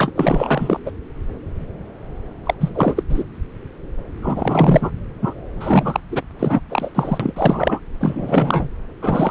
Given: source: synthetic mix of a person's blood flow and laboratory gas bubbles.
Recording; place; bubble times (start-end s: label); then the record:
Doppler ultrasound of blood flow; subclavian vein
0.00-0.10 s: bubbles
0.15-0.80 s: bubbles
0.85-0.91 s: bubbles
2.45-2.54 s: bubbles
2.60-3.03 s: bubbles
3.09-3.23 s: bubbles
4.21-4.91 s: bubbles
5.21-5.33 s: bubbles
5.60-6.00 s: bubbles
6.11-6.22 s: bubbles
6.39-6.61 s: bubbles
6.70-6.91 s: bubbles
6.95-7.33 s: bubbles
7.36-7.80 s: bubbles
8.01-8.69 s: bubbles
9.01-9.31 s: bubbles
From the record:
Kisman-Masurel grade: 333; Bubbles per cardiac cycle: rolling drumbeat, 9 or more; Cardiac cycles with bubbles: 50 to 99%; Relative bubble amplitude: loud (0.450 to 0.775); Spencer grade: 3 (all of the cardiac periods contain showers or single bubble signals, but not dominating or overriding the cardiac motion signals); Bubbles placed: anywhere in the cardiac cycle